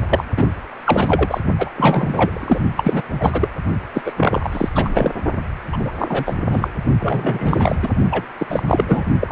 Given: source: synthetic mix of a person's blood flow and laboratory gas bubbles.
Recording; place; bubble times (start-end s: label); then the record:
Doppler ultrasound of blood flow; precordium
0.09-0.24 s: bubbles
0.37-0.48 s: bubbles
0.84-1.41 s: bubbles
1.57-1.70 s: bubbles
1.77-2.60 s: bubbles
2.77-3.03 s: bubbles
3.20-3.51 s: bubbles
3.94-4.13 s: bubbles
4.16-4.49 s: bubbles
4.51-4.68 s: bubbles
4.75-5.11 s: bubbles
5.72-5.92 s: bubbles
5.98-6.36 s: bubbles
6.50-6.68 s: bubbles
6.99-7.75 s: bubbles
7.82-7.88 s: bubbles
8.10-8.25 s: bubbles
8.38-8.47 s: bubbles
8.49-8.63 s: bubbles
8.67-9.04 s: bubbles
9.21-9.32 s: bubbles
From the record:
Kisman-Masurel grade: 343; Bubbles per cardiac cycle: rolling drumbeat, 9 or more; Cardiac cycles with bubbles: 100%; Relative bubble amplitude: loud (0.450 to 0.775); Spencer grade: 3 (all of the cardiac periods contain showers or single bubble signals, but not dominating or overriding the cardiac motion signals); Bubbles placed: only in the low amplitude regions of the cardiac cycle